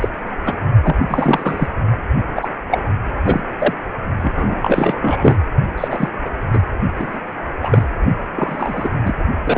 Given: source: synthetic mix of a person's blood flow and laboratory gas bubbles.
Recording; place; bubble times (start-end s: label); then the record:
Doppler ultrasound of blood flow; precordium
0.01-0.09 s: bubbles
0.46-0.54 s: bubbles
0.83-0.95 s: bubbles
1.08-1.69 s: bubbles
2.35-2.48 s: bubbles
2.71-2.83 s: bubbles
3.25-3.42 s: bubbles
3.58-3.73 s: bubbles
4.21-5.37 s: bubbles
5.78-6.08 s: bubbles
6.25-6.30 s: bubbles
6.53-6.63 s: bubbles
6.96-7.20 s: bubbles
7.62-7.85 s: bubbles
8.35-8.90 s: bubbles
9.04-9.13 s: bubbles
9.44-9.58 s: bubbles
From the record:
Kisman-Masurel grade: 243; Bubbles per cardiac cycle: several, 3 to 8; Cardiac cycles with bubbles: 100%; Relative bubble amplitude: loud (0.450 to 0.775); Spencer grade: 3 (all of the cardiac periods contain showers or single bubble signals, but not dominating or overriding the cardiac motion signals); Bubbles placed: only in the low amplitude regions of the cardiac cycle